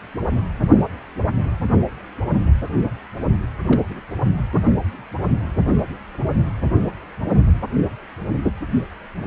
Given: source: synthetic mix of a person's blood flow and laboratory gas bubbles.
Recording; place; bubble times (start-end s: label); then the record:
Doppler ultrasound of blood flow; precordium
3.65-3.82 s: bubbles
3.90-4.02 s: bubbles
4.23-4.42 s: bubbles
From the record:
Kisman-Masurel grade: 211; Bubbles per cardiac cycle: several, 3 to 8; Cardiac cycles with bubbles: 1 to 10%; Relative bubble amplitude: barely perceptible (0.100 to 0.250); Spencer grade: 1 (occasional bubble signal discernible with the cardiac motion signal, with majority of cardiac periods free of bubbles); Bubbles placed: anywhere in the cardiac cycle